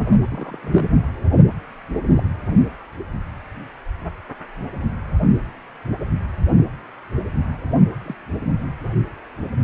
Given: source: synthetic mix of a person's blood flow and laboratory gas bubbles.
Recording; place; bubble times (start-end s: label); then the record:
Doppler ultrasound of blood flow; precordium
0.20-0.59 s: bubbles
0.61-0.88 s: bubbles
2.09-2.22 s: bubbles
8.05-8.15 s: bubbles
From the record:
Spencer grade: 2 (many but less than half of the cardiac periods contain bubble signals, singularly or in groups); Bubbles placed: anywhere in the cardiac cycle